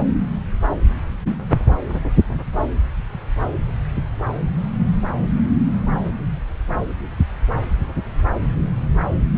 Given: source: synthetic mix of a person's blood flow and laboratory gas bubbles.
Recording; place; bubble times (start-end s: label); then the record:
Doppler ultrasound of blood flow; subclavian vein
no bubbles
From the record:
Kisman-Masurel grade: 000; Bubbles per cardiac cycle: 0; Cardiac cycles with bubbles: 0%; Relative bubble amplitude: no bubbles discernible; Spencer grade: 0 (complete lack of bubble signals)